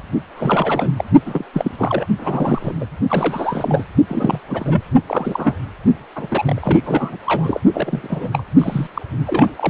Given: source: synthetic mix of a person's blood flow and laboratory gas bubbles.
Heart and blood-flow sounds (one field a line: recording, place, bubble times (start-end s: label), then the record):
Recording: Doppler ultrasound of blood flow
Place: precordium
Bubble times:
0.00-0.02 s: bubbles
0.36-0.93 s: bubbles
0.97-1.05 s: bubbles
1.26-1.45 s: bubbles
1.53-1.72 s: bubbles
1.77-2.06 s: bubbles
2.19-2.73 s: bubbles
2.80-2.85 s: bubbles
3.08-3.83 s: bubbles
4.07-4.40 s: bubbles
4.48-4.81 s: bubbles
5.06-5.59 s: bubbles
6.15-6.27 s: bubbles
6.31-6.80 s: bubbles
6.85-7.17 s: bubbles
7.26-7.59 s: bubbles
7.73-8.44 s: bubbles
8.58-8.88 s: bubbles
8.96-9.02 s: bubbles
9.27-9.50 s: bubbles
9.56-9.70 s: bubbles
From the record:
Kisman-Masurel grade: 342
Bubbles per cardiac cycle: rolling drumbeat, 9 or more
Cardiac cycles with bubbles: 100%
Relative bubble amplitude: moderate (0.250 to 0.450)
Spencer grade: 3 (all of the cardiac periods contain showers or single bubble signals, but not dominating or overriding the cardiac motion signals)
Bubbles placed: only in the low amplitude regions of the cardiac cycle